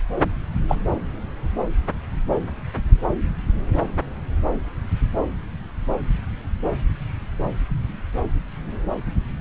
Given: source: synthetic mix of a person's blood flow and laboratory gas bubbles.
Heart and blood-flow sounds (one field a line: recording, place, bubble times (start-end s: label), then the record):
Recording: Doppler ultrasound of blood flow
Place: subclavian vein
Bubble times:
0.68-0.75 s: bubbles
From the record:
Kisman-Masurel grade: 112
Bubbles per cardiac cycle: 1 to 2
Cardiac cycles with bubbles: 1 to 10%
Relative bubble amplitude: moderate (0.250 to 0.450)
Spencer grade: 1 (occasional bubble signal discernible with the cardiac motion signal, with majority of cardiac periods free of bubbles)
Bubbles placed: anywhere in the cardiac cycle